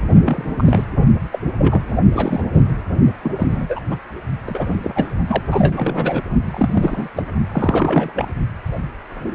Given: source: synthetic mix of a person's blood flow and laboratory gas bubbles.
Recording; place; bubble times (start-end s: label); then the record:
Doppler ultrasound of blood flow; precordium
0.25-0.48 s: bubbles
0.57-0.84 s: bubbles
1.32-1.40 s: bubbles
1.58-1.82 s: bubbles
2.12-2.43 s: bubbles
2.54-2.60 s: bubbles
3.23-3.81 s: bubbles
3.90-3.97 s: bubbles
4.47-4.76 s: bubbles
4.82-5.12 s: bubbles
5.28-5.42 s: bubbles
5.50-6.20 s: bubbles
6.45-7.08 s: bubbles
7.17-7.24 s: bubbles
7.52-8.29 s: bubbles
From the record:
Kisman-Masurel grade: 232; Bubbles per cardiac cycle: several, 3 to 8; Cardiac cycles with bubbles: 50 to 99%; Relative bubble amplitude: moderate (0.250 to 0.450); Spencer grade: 3 (all of the cardiac periods contain showers or single bubble signals, but not dominating or overriding the cardiac motion signals); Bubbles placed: only in the low amplitude regions of the cardiac cycle